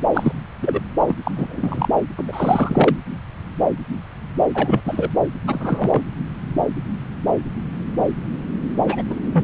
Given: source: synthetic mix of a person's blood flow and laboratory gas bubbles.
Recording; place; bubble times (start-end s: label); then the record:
Doppler ultrasound of blood flow; subclavian vein
0.13-0.32 s: bubbles
0.62-0.82 s: bubbles
1.07-1.15 s: bubbles
1.23-1.31 s: bubbles
1.36-1.88 s: bubbles
2.17-2.24 s: bubbles
2.27-2.98 s: bubbles
4.54-4.82 s: bubbles
4.85-5.11 s: bubbles
5.47-6.02 s: bubbles
8.87-9.03 s: bubbles
9.10-9.15 s: bubbles
9.25-9.44 s: bubbles
From the record:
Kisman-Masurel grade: 233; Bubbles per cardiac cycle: several, 3 to 8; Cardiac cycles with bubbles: 50 to 99%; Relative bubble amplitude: loud (0.450 to 0.775); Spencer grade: 3 (all of the cardiac periods contain showers or single bubble signals, but not dominating or overriding the cardiac motion signals); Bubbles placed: anywhere in the cardiac cycle